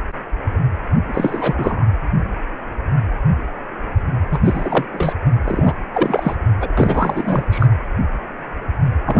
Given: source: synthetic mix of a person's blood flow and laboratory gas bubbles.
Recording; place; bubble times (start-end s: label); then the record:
Doppler ultrasound of blood flow; precordium
1.05-1.84 s: bubbles
4.29-4.85 s: bubbles
4.94-5.13 s: bubbles
5.44-5.74 s: bubbles
5.94-6.36 s: bubbles
6.60-6.73 s: bubbles
6.77-7.45 s: bubbles
7.51-7.67 s: bubbles
9.06-9.20 s: bubbles
From the record:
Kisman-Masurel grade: 332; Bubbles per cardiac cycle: rolling drumbeat, 9 or more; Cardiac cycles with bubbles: 50 to 99%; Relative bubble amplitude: moderate (0.250 to 0.450); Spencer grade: 3 (all of the cardiac periods contain showers or single bubble signals, but not dominating or overriding the cardiac motion signals); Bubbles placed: anywhere in the cardiac cycle